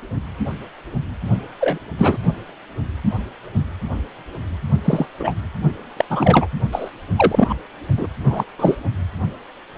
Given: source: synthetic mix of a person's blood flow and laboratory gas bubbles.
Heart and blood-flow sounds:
Doppler ultrasound of blood flow; precordium
1.60-1.78 s: bubbles
1.98-2.17 s: bubbles
4.84-5.06 s: bubbles
5.19-5.34 s: bubbles
5.96-6.05 s: bubbles
6.09-6.47 s: bubbles
6.71-6.90 s: bubbles
7.16-7.55 s: bubbles
7.97-8.07 s: bubbles
8.24-8.44 s: bubbles
8.59-8.75 s: bubbles
From the record:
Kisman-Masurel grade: 233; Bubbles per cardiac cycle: several, 3 to 8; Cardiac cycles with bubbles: 50 to 99%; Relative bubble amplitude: loud (0.450 to 0.775); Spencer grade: 3 (all of the cardiac periods contain showers or single bubble signals, but not dominating or overriding the cardiac motion signals); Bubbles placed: only in the low amplitude regions of the cardiac cycle

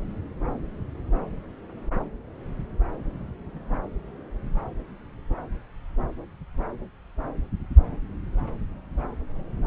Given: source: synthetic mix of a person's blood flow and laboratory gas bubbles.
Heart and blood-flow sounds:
Doppler ultrasound of blood flow; subclavian vein
no bubbles
From the record:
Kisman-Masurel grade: 000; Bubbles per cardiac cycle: 0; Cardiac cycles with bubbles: 0%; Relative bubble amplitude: no bubbles discernible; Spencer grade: 0 (complete lack of bubble signals)

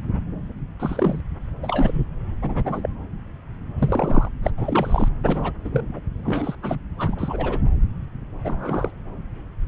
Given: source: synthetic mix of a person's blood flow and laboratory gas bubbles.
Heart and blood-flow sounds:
Doppler ultrasound of blood flow; subclavian vein
0.79-1.21 s: bubbles
1.63-2.04 s: bubbles
2.42-2.89 s: bubbles
3.78-4.29 s: bubbles
4.42-4.50 s: bubbles
4.58-5.08 s: bubbles
5.24-5.52 s: bubbles
5.64-6.00 s: bubbles
6.25-6.55 s: bubbles
6.62-6.75 s: bubbles
6.98-7.16 s: bubbles
7.18-7.59 s: bubbles
8.44-8.90 s: bubbles
From the record:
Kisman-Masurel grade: 232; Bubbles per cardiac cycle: several, 3 to 8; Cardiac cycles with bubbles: 50 to 99%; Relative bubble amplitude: moderate (0.250 to 0.450); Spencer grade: 3 (all of the cardiac periods contain showers or single bubble signals, but not dominating or overriding the cardiac motion signals); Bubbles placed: anywhere in the cardiac cycle

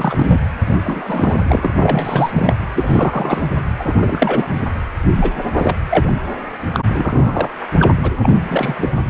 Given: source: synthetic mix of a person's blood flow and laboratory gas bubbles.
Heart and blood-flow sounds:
Doppler ultrasound of blood flow; precordium
0.00-0.39 s: bubbles
0.65-0.76 s: bubbles
0.84-1.70 s: bubbles
1.78-2.55 s: bubbles
2.75-3.42 s: bubbles
3.52-3.58 s: bubbles
3.78-4.49 s: bubbles
4.54-4.62 s: bubbles
5.15-5.32 s: bubbles
5.57-5.75 s: bubbles
5.90-6.11 s: bubbles
6.74-6.79 s: bubbles
6.91-7.52 s: bubbles
7.61-7.67 s: bubbles
7.79-7.89 s: bubbles
8.03-8.12 s: bubbles
8.22-8.95 s: bubbles
From the record:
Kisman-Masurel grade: 332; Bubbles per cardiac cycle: rolling drumbeat, 9 or more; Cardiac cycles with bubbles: 50 to 99%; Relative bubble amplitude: moderate (0.250 to 0.450); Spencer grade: 3 (all of the cardiac periods contain showers or single bubble signals, but not dominating or overriding the cardiac motion signals); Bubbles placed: anywhere in the cardiac cycle

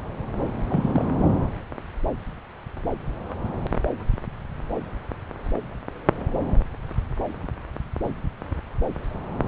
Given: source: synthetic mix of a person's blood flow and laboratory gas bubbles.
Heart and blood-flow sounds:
Doppler ultrasound of blood flow; subclavian vein
0.70-1.05 s: bubbles
From the record:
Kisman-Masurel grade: 211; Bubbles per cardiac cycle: several, 3 to 8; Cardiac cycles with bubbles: 1 to 10%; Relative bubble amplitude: barely perceptible (0.100 to 0.250); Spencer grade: 1 (occasional bubble signal discernible with the cardiac motion signal, with majority of cardiac periods free of bubbles); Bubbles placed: anywhere in the cardiac cycle

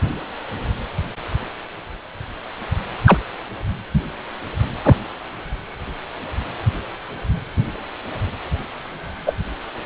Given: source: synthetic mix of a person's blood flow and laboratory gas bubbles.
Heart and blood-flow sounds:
Doppler ultrasound of blood flow; precordium
3.06-3.18 s: bubbles
4.82-4.96 s: bubbles
9.26-9.33 s: bubbles
From the record:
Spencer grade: 2 (many but less than half of the cardiac periods contain bubble signals, singularly or in groups); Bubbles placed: anywhere in the cardiac cycle

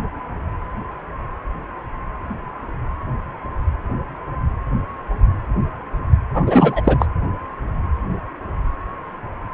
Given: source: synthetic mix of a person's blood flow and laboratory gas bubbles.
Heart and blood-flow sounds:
Doppler ultrasound of blood flow; precordium
6.33-6.81 s: bubbles
6.84-7.06 s: bubbles
From the record:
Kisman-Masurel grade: 213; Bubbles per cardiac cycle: several, 3 to 8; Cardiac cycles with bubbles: 1 to 10%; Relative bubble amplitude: loud (0.450 to 0.775); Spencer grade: 1 (occasional bubble signal discernible with the cardiac motion signal, with majority of cardiac periods free of bubbles); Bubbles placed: anywhere in the cardiac cycle

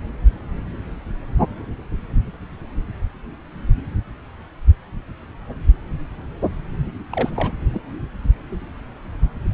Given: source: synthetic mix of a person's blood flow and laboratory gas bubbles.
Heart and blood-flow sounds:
Doppler ultrasound of blood flow; subclavian vein
7.11-7.52 s: bubbles
7.74-7.80 s: bubbles
From the record:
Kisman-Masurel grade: 211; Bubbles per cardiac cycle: several, 3 to 8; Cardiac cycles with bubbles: 1 to 10%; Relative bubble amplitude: barely perceptible (0.100 to 0.250); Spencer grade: 1 (occasional bubble signal discernible with the cardiac motion signal, with majority of cardiac periods free of bubbles); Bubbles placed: anywhere in the cardiac cycle

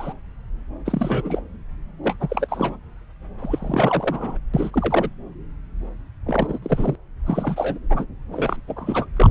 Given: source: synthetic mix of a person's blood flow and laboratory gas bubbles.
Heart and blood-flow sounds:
Doppler ultrasound of blood flow; subclavian vein
0.00-0.13 s: bubbles
0.85-1.40 s: bubbles
2.03-2.15 s: bubbles
2.20-2.76 s: bubbles
3.38-4.38 s: bubbles
4.54-5.09 s: bubbles
6.26-6.58 s: bubbles
6.62-6.96 s: bubbles
7.26-7.78 s: bubbles
7.89-8.06 s: bubbles
8.32-8.56 s: bubbles
8.68-9.05 s: bubbles
9.16-9.31 s: bubbles
From the record:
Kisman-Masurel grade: 332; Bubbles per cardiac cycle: rolling drumbeat, 9 or more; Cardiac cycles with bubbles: 50 to 99%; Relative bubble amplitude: moderate (0.250 to 0.450); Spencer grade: 3 (all of the cardiac periods contain showers or single bubble signals, but not dominating or overriding the cardiac motion signals); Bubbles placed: anywhere in the cardiac cycle

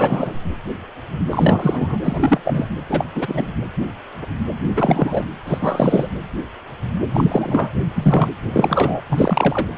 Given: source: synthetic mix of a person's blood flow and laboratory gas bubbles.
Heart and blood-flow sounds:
Doppler ultrasound of blood flow; precordium
0.00-0.38 s: bubbles
1.30-1.97 s: bubbles
2.04-2.42 s: bubbles
2.45-2.69 s: bubbles
2.89-3.04 s: bubbles
3.15-3.53 s: bubbles
4.76-5.29 s: bubbles
5.45-6.08 s: bubbles
7.13-7.70 s: bubbles
7.96-8.29 s: bubbles
8.53-9.02 s: bubbles
9.10-9.68 s: bubbles
From the record:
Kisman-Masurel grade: 333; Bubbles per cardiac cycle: rolling drumbeat, 9 or more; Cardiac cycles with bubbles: 50 to 99%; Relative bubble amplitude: loud (0.450 to 0.775); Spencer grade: 3 (all of the cardiac periods contain showers or single bubble signals, but not dominating or overriding the cardiac motion signals); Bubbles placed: anywhere in the cardiac cycle

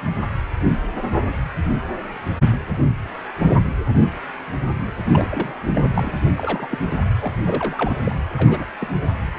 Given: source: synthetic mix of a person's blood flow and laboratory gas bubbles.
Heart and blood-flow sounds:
Doppler ultrasound of blood flow; precordium
5.12-5.69 s: bubbles
5.75-5.85 s: bubbles
5.94-6.12 s: bubbles
6.37-6.67 s: bubbles
6.71-6.78 s: bubbles
7.02-7.05 s: bubbles
7.21-7.34 s: bubbles
7.46-7.94 s: bubbles
8.05-8.16 s: bubbles
8.37-8.65 s: bubbles
8.79-8.90 s: bubbles
From the record:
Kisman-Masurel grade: 222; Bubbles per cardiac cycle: several, 3 to 8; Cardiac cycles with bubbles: 10 to 50%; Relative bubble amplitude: moderate (0.250 to 0.450); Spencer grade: 2 (many but less than half of the cardiac periods contain bubble signals, singularly or in groups); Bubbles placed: anywhere in the cardiac cycle

